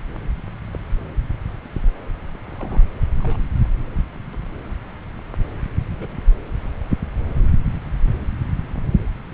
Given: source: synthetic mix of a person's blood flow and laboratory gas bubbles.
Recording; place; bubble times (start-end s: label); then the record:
Doppler ultrasound of blood flow; subclavian vein
0.73-0.77 s: bubbles
2.46-2.84 s: bubbles
3.20-3.38 s: bubbles
5.89-6.17 s: bubbles
From the record:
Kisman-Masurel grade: 121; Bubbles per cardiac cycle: 1 to 2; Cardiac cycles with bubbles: 10 to 50%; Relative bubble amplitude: barely perceptible (0.100 to 0.250); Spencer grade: 2 (many but less than half of the cardiac periods contain bubble signals, singularly or in groups); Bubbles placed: anywhere in the cardiac cycle